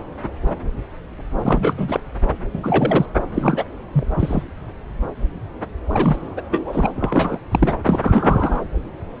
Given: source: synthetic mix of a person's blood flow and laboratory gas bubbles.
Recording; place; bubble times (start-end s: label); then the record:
Doppler ultrasound of blood flow; subclavian vein
1.42-2.00 s: bubbles
2.53-3.06 s: bubbles
3.34-3.68 s: bubbles
3.93-4.07 s: bubbles
4.19-4.43 s: bubbles
5.88-6.42 s: bubbles
6.51-6.91 s: bubbles
6.96-7.38 s: bubbles
7.51-7.73 s: bubbles
7.85-8.61 s: bubbles
From the record:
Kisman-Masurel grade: 332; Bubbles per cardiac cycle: rolling drumbeat, 9 or more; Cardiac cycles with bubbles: 50 to 99%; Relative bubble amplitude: moderate (0.250 to 0.450); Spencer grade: 3 (all of the cardiac periods contain showers or single bubble signals, but not dominating or overriding the cardiac motion signals); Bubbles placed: anywhere in the cardiac cycle